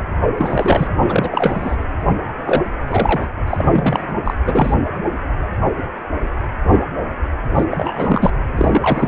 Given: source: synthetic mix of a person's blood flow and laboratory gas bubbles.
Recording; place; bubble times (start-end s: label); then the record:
Doppler ultrasound of blood flow; precordium
0.37-0.92 s: bubbles
1.01-1.76 s: bubbles
2.46-2.63 s: bubbles
2.87-3.26 s: bubbles
3.47-3.67 s: bubbles
3.72-4.18 s: bubbles
4.25-4.34 s: bubbles
4.45-4.74 s: bubbles
7.55-7.64 s: bubbles
7.71-8.30 s: bubbles
8.56-9.08 s: bubbles
From the record:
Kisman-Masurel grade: 332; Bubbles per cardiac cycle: rolling drumbeat, 9 or more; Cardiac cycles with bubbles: 50 to 99%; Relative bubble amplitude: moderate (0.250 to 0.450); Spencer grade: 3 (all of the cardiac periods contain showers or single bubble signals, but not dominating or overriding the cardiac motion signals); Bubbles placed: anywhere in the cardiac cycle